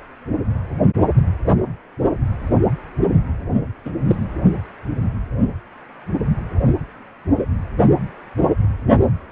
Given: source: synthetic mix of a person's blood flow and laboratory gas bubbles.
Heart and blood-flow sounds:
Doppler ultrasound of blood flow; precordium
3.85-3.91 s: bubbles
4.08-4.16 s: bubbles
From the record:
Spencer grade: 1 (occasional bubble signal discernible with the cardiac motion signal, with majority of cardiac periods free of bubbles); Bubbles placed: anywhere in the cardiac cycle

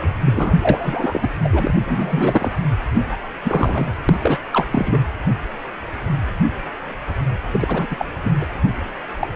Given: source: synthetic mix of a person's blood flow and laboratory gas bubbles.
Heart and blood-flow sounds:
Doppler ultrasound of blood flow; precordium
0.00-0.16 s: bubbles
0.26-0.56 s: bubbles
0.61-1.28 s: bubbles
1.44-1.74 s: bubbles
1.87-2.52 s: bubbles
2.91-3.01 s: bubbles
3.08-3.17 s: bubbles
3.43-3.95 s: bubbles
4.08-4.39 s: bubbles
4.53-4.67 s: bubbles
4.71-4.99 s: bubbles
7.52-7.87 s: bubbles
7.90-8.05 s: bubbles
8.23-8.32 s: bubbles
8.40-8.46 s: bubbles
9.21-9.27 s: bubbles
From the record:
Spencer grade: 3 (all of the cardiac periods contain showers or single bubble signals, but not dominating or overriding the cardiac motion signals); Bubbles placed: anywhere in the cardiac cycle

